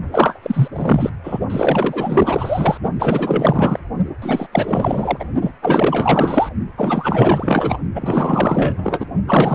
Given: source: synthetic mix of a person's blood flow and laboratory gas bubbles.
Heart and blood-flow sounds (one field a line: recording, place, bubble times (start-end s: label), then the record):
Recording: Doppler ultrasound of blood flow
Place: precordium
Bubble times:
0.11-0.40 s: bubbles
0.42-0.68 s: bubbles
0.73-1.10 s: bubbles
1.23-1.40 s: bubbles
1.49-2.77 s: bubbles
2.98-3.79 s: bubbles
4.22-4.47 s: bubbles
4.52-5.25 s: bubbles
5.42-5.52 s: bubbles
5.62-6.49 s: bubbles
6.77-7.79 s: bubbles
7.95-9.06 s: bubbles
9.27-9.54 s: bubbles
From the record:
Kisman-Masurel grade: 444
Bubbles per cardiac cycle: continuous sound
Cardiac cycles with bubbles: 100%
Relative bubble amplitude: maximal (0.775 to 0.999)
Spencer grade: 4 (maximum detectable bubble signal sounding continuously throughout systole and diastole of every cardiac period, and overriding the amplitude of the normal cardiac signals)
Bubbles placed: only in the low amplitude regions of the cardiac cycle